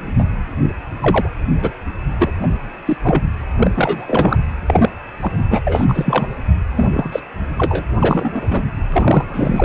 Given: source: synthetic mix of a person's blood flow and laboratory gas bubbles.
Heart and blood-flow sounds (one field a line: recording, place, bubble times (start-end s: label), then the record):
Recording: Doppler ultrasound of blood flow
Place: precordium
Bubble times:
0.18-0.24 s: bubbles
1.02-1.28 s: bubbles
1.53-1.72 s: bubbles
2.19-2.31 s: bubbles
2.42-2.47 s: bubbles
2.85-2.97 s: bubbles
3.02-3.26 s: bubbles
3.56-3.71 s: bubbles
3.75-4.37 s: bubbles
4.67-4.89 s: bubbles
5.20-5.32 s: bubbles
5.50-5.61 s: bubbles
5.66-5.85 s: bubbles
5.88-6.27 s: bubbles
6.75-6.88 s: bubbles
6.93-7.09 s: bubbles
7.12-7.20 s: bubbles
7.57-7.85 s: bubbles
8.00-8.65 s: bubbles
8.92-9.65 s: bubbles
From the record:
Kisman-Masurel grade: 243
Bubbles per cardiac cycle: several, 3 to 8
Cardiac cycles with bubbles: 100%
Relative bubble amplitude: loud (0.450 to 0.775)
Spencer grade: 3 (all of the cardiac periods contain showers or single bubble signals, but not dominating or overriding the cardiac motion signals)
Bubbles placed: anywhere in the cardiac cycle